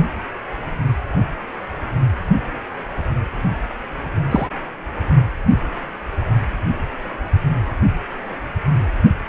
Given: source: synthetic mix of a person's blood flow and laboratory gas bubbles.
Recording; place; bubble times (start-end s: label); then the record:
Doppler ultrasound of blood flow; precordium
4.30-4.47 s: bubbles
From the record:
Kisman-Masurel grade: 113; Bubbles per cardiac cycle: 1 to 2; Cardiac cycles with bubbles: 1 to 10%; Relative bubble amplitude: loud (0.450 to 0.775); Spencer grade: 1 (occasional bubble signal discernible with the cardiac motion signal, with majority of cardiac periods free of bubbles); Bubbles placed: only in the low amplitude regions of the cardiac cycle